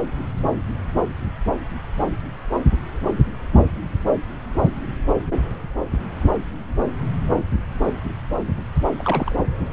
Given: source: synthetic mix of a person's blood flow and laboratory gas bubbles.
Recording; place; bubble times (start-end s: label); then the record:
Doppler ultrasound of blood flow; subclavian vein
8.98-9.35 s: bubbles
From the record:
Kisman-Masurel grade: 112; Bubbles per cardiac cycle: 1 to 2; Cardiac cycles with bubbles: 1 to 10%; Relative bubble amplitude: moderate (0.250 to 0.450); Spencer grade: 1 (occasional bubble signal discernible with the cardiac motion signal, with majority of cardiac periods free of bubbles); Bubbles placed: anywhere in the cardiac cycle